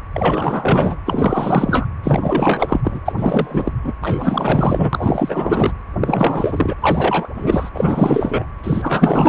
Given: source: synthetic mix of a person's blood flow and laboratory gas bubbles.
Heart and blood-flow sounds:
Doppler ultrasound of blood flow; precordium
0.14-0.97 s: bubbles
1.05-1.87 s: bubbles
2.04-2.81 s: bubbles
2.84-3.00 s: bubbles
3.06-3.12 s: bubbles
3.17-3.73 s: bubbles
3.84-3.94 s: bubbles
4.01-5.72 s: bubbles
6.01-6.76 s: bubbles
6.82-7.29 s: bubbles
7.35-7.70 s: bubbles
7.74-8.46 s: bubbles
8.63-9.29 s: bubbles
From the record:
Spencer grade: 4 (maximum detectable bubble signal sounding continuously throughout systole and diastole of every cardiac period, and overriding the amplitude of the normal cardiac signals); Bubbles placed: anywhere in the cardiac cycle

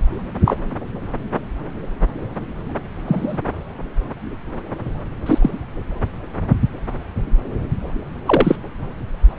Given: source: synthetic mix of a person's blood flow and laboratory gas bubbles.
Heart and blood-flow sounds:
Doppler ultrasound of blood flow; subclavian vein
0.45-0.58 s: bubbles
3.07-3.38 s: bubbles
5.25-5.38 s: bubbles
5.41-5.50 s: bubbles
8.25-8.56 s: bubbles
From the record:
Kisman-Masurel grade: 123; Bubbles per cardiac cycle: 1 to 2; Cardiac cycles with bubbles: 10 to 50%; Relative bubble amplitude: loud (0.450 to 0.775); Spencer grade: 2 (many but less than half of the cardiac periods contain bubble signals, singularly or in groups); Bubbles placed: anywhere in the cardiac cycle

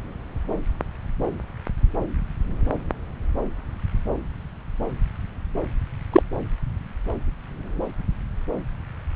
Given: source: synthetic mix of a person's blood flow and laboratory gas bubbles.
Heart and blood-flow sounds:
Doppler ultrasound of blood flow; subclavian vein
6.12-6.22 s: bubbles
From the record:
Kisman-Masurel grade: 113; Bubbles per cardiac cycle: 1 to 2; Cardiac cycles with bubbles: 1 to 10%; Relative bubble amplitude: loud (0.450 to 0.775); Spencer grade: 1 (occasional bubble signal discernible with the cardiac motion signal, with majority of cardiac periods free of bubbles); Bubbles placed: anywhere in the cardiac cycle

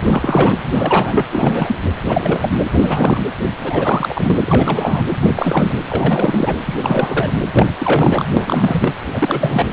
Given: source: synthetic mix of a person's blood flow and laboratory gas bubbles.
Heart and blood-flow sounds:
Doppler ultrasound of blood flow; precordium
0.00-0.58 s: bubbles
0.74-1.26 s: bubbles
1.32-1.79 s: bubbles
2.08-2.66 s: bubbles
2.71-3.26 s: bubbles
3.62-4.38 s: bubbles
4.46-5.04 s: bubbles
5.22-5.30 s: bubbles
5.35-5.77 s: bubbles
5.88-6.60 s: bubbles
6.65-6.76 s: bubbles
6.82-7.31 s: bubbles
7.52-7.66 s: bubbles
7.79-8.24 s: bubbles
8.37-8.94 s: bubbles
9.11-9.66 s: bubbles
From the record:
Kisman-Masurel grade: 342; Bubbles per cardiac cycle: rolling drumbeat, 9 or more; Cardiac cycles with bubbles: 100%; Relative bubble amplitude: moderate (0.250 to 0.450); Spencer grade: 3 (all of the cardiac periods contain showers or single bubble signals, but not dominating or overriding the cardiac motion signals); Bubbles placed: anywhere in the cardiac cycle

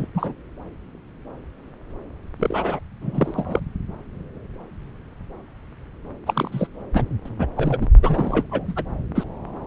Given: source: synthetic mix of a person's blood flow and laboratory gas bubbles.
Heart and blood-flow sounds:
Doppler ultrasound of blood flow; subclavian vein
0.00-0.06 s: bubbles
0.15-0.33 s: bubbles
2.39-2.79 s: bubbles
3.01-3.59 s: bubbles
6.26-6.67 s: bubbles
6.93-7.04 s: bubbles
7.25-7.30 s: bubbles
7.38-7.46 s: bubbles
7.56-7.88 s: bubbles
8.03-8.46 s: bubbles
8.51-8.73 s: bubbles
8.76-8.83 s: bubbles
9.14-9.24 s: bubbles
From the record:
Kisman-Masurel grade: 232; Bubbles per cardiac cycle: several, 3 to 8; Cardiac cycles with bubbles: 50 to 99%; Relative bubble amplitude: moderate (0.250 to 0.450); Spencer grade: 3 (all of the cardiac periods contain showers or single bubble signals, but not dominating or overriding the cardiac motion signals); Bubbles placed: anywhere in the cardiac cycle

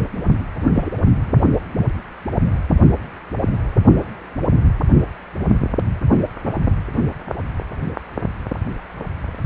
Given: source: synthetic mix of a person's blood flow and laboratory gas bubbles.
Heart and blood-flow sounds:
Doppler ultrasound of blood flow; precordium
0.75-0.89 s: bubbles
From the record:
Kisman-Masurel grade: 113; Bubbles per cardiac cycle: 1 to 2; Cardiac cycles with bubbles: 1 to 10%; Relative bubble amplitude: loud (0.450 to 0.775); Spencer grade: 1 (occasional bubble signal discernible with the cardiac motion signal, with majority of cardiac periods free of bubbles); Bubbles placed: only in the low amplitude regions of the cardiac cycle

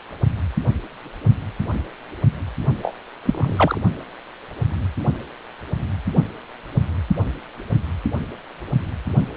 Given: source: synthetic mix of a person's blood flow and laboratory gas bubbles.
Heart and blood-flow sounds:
Doppler ultrasound of blood flow; precordium
2.82-2.93 s: bubbles
3.25-3.81 s: bubbles
From the record:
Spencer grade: 1 (occasional bubble signal discernible with the cardiac motion signal, with majority of cardiac periods free of bubbles); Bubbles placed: only in the low amplitude regions of the cardiac cycle

